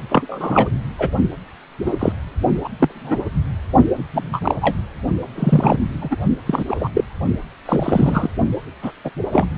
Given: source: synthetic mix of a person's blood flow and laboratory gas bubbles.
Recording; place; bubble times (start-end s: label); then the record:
Doppler ultrasound of blood flow; precordium
0.09-0.68 s: bubbles
0.98-1.10 s: bubbles
1.85-2.12 s: bubbles
2.64-2.68 s: bubbles
2.79-3.17 s: bubbles
4.13-4.55 s: bubbles
4.61-4.75 s: bubbles
5.35-5.79 s: bubbles
6.00-6.16 s: bubbles
6.46-6.64 s: bubbles
6.67-6.89 s: bubbles
6.93-7.04 s: bubbles
7.66-8.30 s: bubbles
8.83-8.92 s: bubbles
9.04-9.11 s: bubbles
9.32-9.45 s: bubbles
From the record:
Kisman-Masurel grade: 243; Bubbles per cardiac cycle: several, 3 to 8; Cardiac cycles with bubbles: 100%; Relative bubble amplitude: loud (0.450 to 0.775); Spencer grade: 3 (all of the cardiac periods contain showers or single bubble signals, but not dominating or overriding the cardiac motion signals); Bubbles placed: only in the low amplitude regions of the cardiac cycle